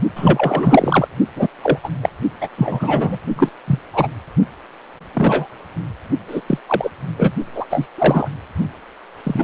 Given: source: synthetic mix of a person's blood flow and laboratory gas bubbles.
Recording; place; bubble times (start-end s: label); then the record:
Doppler ultrasound of blood flow; precordium
0.15-1.08 s: bubbles
1.35-1.48 s: bubbles
1.61-1.78 s: bubbles
1.83-1.88 s: bubbles
2.02-2.09 s: bubbles
2.41-2.48 s: bubbles
2.58-3.17 s: bubbles
3.35-3.50 s: bubbles
3.67-3.79 s: bubbles
3.93-4.08 s: bubbles
5.14-5.47 s: bubbles
6.28-6.41 s: bubbles
6.47-6.58 s: bubbles
6.67-6.91 s: bubbles
7.18-7.32 s: bubbles
7.54-7.66 s: bubbles
7.70-7.87 s: bubbles
7.98-8.29 s: bubbles
9.23-9.43 s: bubbles
From the record:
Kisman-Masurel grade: 243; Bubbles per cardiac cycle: several, 3 to 8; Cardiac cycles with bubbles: 100%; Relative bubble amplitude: loud (0.450 to 0.775); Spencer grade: 3 (all of the cardiac periods contain showers or single bubble signals, but not dominating or overriding the cardiac motion signals); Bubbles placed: only in the low amplitude regions of the cardiac cycle